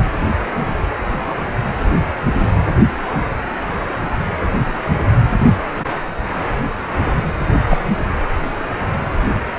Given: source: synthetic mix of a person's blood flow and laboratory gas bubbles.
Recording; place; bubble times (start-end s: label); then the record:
Doppler ultrasound of blood flow; precordium
7.69-7.78 s: bubbles
From the record:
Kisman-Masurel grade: 113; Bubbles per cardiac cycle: 1 to 2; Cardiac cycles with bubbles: 1 to 10%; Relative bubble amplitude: loud (0.450 to 0.775); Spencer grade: 1 (occasional bubble signal discernible with the cardiac motion signal, with majority of cardiac periods free of bubbles); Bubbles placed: anywhere in the cardiac cycle